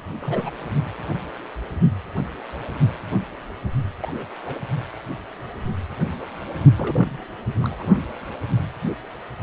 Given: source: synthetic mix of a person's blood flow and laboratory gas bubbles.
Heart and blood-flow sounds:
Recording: Doppler ultrasound of blood flow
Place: precordium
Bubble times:
0.20-0.52 s: bubbles
4.03-4.12 s: bubbles
4.15-4.29 s: bubbles
4.42-4.60 s: bubbles
6.75-7.21 s: bubbles
7.62-7.88 s: bubbles
From the record:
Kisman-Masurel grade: 221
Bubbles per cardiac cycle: several, 3 to 8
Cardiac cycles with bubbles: 10 to 50%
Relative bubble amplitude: barely perceptible (0.100 to 0.250)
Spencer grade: 2 (many but less than half of the cardiac periods contain bubble signals, singularly or in groups)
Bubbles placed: only in the low amplitude regions of the cardiac cycle

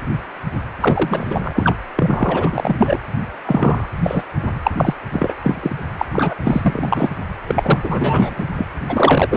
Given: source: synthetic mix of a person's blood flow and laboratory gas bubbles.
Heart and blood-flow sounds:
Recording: Doppler ultrasound of blood flow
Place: precordium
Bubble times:
0.80-1.75 s: bubbles
1.96-2.99 s: bubbles
3.46-3.86 s: bubbles
4.03-4.24 s: bubbles
4.63-4.71 s: bubbles
4.77-4.94 s: bubbles
5.12-5.34 s: bubbles
5.42-5.87 s: bubbles
5.98-6.06 s: bubbles
6.13-6.35 s: bubbles
6.43-7.11 s: bubbles
7.47-7.52 s: bubbles
7.56-7.80 s: bubbles
7.83-8.44 s: bubbles
8.56-8.65 s: bubbles
8.88-9.37 s: bubbles
From the record:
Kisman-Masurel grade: 343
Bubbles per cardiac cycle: rolling drumbeat, 9 or more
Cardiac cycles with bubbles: 100%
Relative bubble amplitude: loud (0.450 to 0.775)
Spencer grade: 3 (all of the cardiac periods contain showers or single bubble signals, but not dominating or overriding the cardiac motion signals)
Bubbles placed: anywhere in the cardiac cycle

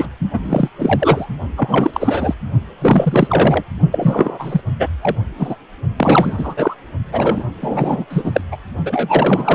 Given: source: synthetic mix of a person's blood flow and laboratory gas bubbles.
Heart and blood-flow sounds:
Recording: Doppler ultrasound of blood flow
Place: precordium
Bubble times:
0.00-0.10 s: bubbles
0.33-0.39 s: bubbles
0.43-0.69 s: bubbles
0.78-1.26 s: bubbles
1.56-2.34 s: bubbles
2.81-3.63 s: bubbles
3.92-4.61 s: bubbles
4.79-4.88 s: bubbles
5.01-5.16 s: bubbles
5.37-5.56 s: bubbles
5.96-6.74 s: bubbles
7.12-7.43 s: bubbles
7.60-8.05 s: bubbles
8.09-8.41 s: bubbles
8.52-8.57 s: bubbles
8.85-9.55 s: bubbles
From the record:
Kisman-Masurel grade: 343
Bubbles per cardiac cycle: rolling drumbeat, 9 or more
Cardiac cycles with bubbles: 100%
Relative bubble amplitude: loud (0.450 to 0.775)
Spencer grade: 3 (all of the cardiac periods contain showers or single bubble signals, but not dominating or overriding the cardiac motion signals)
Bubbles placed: only in the low amplitude regions of the cardiac cycle

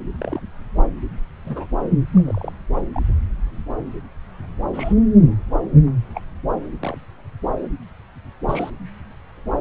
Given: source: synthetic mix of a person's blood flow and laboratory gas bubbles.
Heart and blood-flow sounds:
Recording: Doppler ultrasound of blood flow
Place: subclavian vein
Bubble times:
0.18-0.39 s: bubbles
1.45-1.67 s: bubbles
2.13-2.54 s: bubbles
2.93-3.01 s: bubbles
4.73-4.94 s: bubbles
6.15-6.21 s: bubbles
6.80-6.96 s: bubbles
8.48-8.70 s: bubbles
9.59-9.61 s: bubbles
From the record:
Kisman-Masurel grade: 121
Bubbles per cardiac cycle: 1 to 2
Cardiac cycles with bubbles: 10 to 50%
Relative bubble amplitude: barely perceptible (0.100 to 0.250)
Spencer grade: 2 (many but less than half of the cardiac periods contain bubble signals, singularly or in groups)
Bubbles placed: anywhere in the cardiac cycle

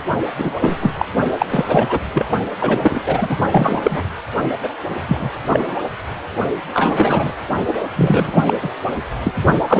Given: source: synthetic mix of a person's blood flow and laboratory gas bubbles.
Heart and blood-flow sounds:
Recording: Doppler ultrasound of blood flow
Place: precordium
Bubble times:
0.38-0.53 s: bubbles
0.60-0.91 s: bubbles
0.98-1.05 s: bubbles
1.38-1.46 s: bubbles
1.48-2.00 s: bubbles
2.12-2.26 s: bubbles
2.60-3.02 s: bubbles
3.06-3.38 s: bubbles
3.52-4.02 s: bubbles
4.62-4.68 s: bubbles
5.08-5.30 s: bubbles
5.46-5.75 s: bubbles
6.74-7.33 s: bubbles
7.67-7.73 s: bubbles
7.96-8.54 s: bubbles
8.62-8.70 s: bubbles
9.23-9.32 s: bubbles
9.54-9.65 s: bubbles
9.68-9.80 s: bubbles
From the record:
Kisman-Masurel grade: 243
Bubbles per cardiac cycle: several, 3 to 8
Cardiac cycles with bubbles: 100%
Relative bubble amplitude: loud (0.450 to 0.775)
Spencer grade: 3 (all of the cardiac periods contain showers or single bubble signals, but not dominating or overriding the cardiac motion signals)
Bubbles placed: only in the low amplitude regions of the cardiac cycle

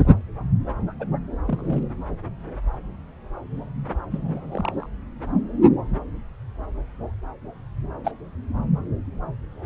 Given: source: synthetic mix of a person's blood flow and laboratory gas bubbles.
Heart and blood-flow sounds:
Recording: Doppler ultrasound of blood flow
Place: subclavian vein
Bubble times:
0.99-1.07 s: bubbles
1.45-1.83 s: bubbles
4.11-4.87 s: bubbles
8.04-8.12 s: bubbles
From the record:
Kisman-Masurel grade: 121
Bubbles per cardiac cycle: 1 to 2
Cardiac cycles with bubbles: 10 to 50%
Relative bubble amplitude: barely perceptible (0.100 to 0.250)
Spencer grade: 2 (many but less than half of the cardiac periods contain bubble signals, singularly or in groups)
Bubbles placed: anywhere in the cardiac cycle

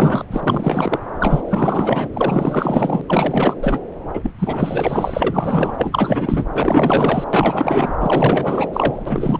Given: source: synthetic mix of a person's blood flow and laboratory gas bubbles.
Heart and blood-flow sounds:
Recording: Doppler ultrasound of blood flow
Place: subclavian vein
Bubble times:
0.00-0.25 s: bubbles
0.31-0.99 s: bubbles
1.19-1.44 s: bubbles
1.47-2.09 s: bubbles
2.13-3.02 s: bubbles
3.07-3.55 s: bubbles
3.60-3.80 s: bubbles
4.14-4.31 s: bubbles
4.39-6.47 s: bubbles
6.54-7.25 s: bubbles
7.33-7.95 s: bubbles
8.00-8.68 s: bubbles
8.72-9.40 s: bubbles
From the record:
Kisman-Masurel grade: 444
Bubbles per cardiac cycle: continuous sound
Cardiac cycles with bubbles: 100%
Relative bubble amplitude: maximal (0.775 to 0.999)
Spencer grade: 4 (maximum detectable bubble signal sounding continuously throughout systole and diastole of every cardiac period, and overriding the amplitude of the normal cardiac signals)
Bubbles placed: anywhere in the cardiac cycle

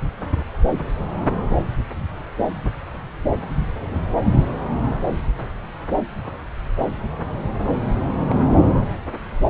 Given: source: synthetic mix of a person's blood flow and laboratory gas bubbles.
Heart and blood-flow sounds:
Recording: Doppler ultrasound of blood flow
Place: subclavian vein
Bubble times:
8.25-8.35 s: bubbles
From the record:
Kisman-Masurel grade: 111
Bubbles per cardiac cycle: 1 to 2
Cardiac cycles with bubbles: 1 to 10%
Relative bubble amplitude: barely perceptible (0.100 to 0.250)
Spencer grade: 1 (occasional bubble signal discernible with the cardiac motion signal, with majority of cardiac periods free of bubbles)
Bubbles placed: anywhere in the cardiac cycle

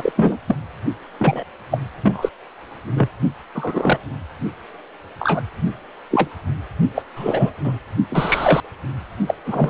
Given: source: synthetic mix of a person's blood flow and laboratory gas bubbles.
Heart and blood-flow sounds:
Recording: Doppler ultrasound of blood flow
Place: precordium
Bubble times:
0.00-0.12 s: bubbles
0.16-0.39 s: bubbles
0.47-0.56 s: bubbles
1.19-1.44 s: bubbles
1.70-1.79 s: bubbles
2.02-2.29 s: bubbles
2.94-3.09 s: bubbles
3.54-3.99 s: bubbles
5.19-5.41 s: bubbles
6.10-6.30 s: bubbles
6.95-7.02 s: bubbles
7.16-7.53 s: bubbles
7.63-7.80 s: bubbles
8.10-8.61 s: bubbles
9.27-9.35 s: bubbles
9.46-9.70 s: bubbles
From the record:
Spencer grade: 3 (all of the cardiac periods contain showers or single bubble signals, but not dominating or overriding the cardiac motion signals)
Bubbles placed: only in the low amplitude regions of the cardiac cycle

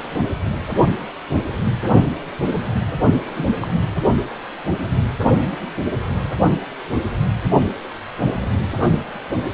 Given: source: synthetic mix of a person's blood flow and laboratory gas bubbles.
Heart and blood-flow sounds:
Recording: Doppler ultrasound of blood flow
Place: precordium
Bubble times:
3.16-3.50 s: bubbles
3.61-3.70 s: bubbles
From the record:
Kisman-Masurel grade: 112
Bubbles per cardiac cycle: 1 to 2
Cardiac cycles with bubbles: 1 to 10%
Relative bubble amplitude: moderate (0.250 to 0.450)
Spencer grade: 1 (occasional bubble signal discernible with the cardiac motion signal, with majority of cardiac periods free of bubbles)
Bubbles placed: only in the low amplitude regions of the cardiac cycle

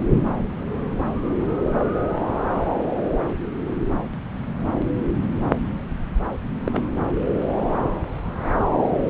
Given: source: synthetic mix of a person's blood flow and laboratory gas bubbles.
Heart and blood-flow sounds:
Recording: Doppler ultrasound of blood flow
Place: subclavian vein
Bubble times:
6.66-6.86 s: bubbles
From the record:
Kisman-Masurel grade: 111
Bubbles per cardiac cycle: 1 to 2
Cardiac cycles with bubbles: 1 to 10%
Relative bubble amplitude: barely perceptible (0.100 to 0.250)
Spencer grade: 1 (occasional bubble signal discernible with the cardiac motion signal, with majority of cardiac periods free of bubbles)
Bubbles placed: anywhere in the cardiac cycle

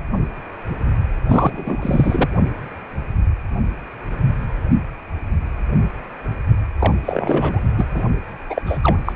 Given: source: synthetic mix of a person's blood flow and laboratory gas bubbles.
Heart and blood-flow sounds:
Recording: Doppler ultrasound of blood flow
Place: precordium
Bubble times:
1.28-2.28 s: bubbles
6.79-6.96 s: bubbles
7.04-7.61 s: bubbles
7.77-7.85 s: bubbles
7.94-8.03 s: bubbles
8.48-8.62 s: bubbles
8.66-8.79 s: bubbles
8.82-9.12 s: bubbles
From the record:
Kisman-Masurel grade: 333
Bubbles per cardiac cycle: rolling drumbeat, 9 or more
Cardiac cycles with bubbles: 50 to 99%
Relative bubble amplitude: loud (0.450 to 0.775)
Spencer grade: 3 (all of the cardiac periods contain showers or single bubble signals, but not dominating or overriding the cardiac motion signals)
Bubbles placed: only in the low amplitude regions of the cardiac cycle

